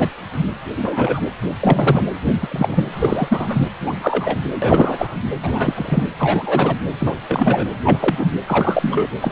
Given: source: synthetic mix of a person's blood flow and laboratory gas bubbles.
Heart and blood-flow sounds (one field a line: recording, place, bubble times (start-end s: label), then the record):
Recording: Doppler ultrasound of blood flow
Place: precordium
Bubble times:
0.00-0.09 s: bubbles
0.39-0.45 s: bubbles
0.77-1.20 s: bubbles
1.60-2.04 s: bubbles
2.29-2.85 s: bubbles
2.93-3.69 s: bubbles
3.86-4.38 s: bubbles
4.62-5.15 s: bubbles
5.42-6.04 s: bubbles
6.18-6.75 s: bubbles
6.99-7.17 s: bubbles
7.28-7.65 s: bubbles
7.84-8.26 s: bubbles
8.46-9.07 s: bubbles
9.21-9.32 s: bubbles
From the record:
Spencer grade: 3 (all of the cardiac periods contain showers or single bubble signals, but not dominating or overriding the cardiac motion signals)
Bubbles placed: anywhere in the cardiac cycle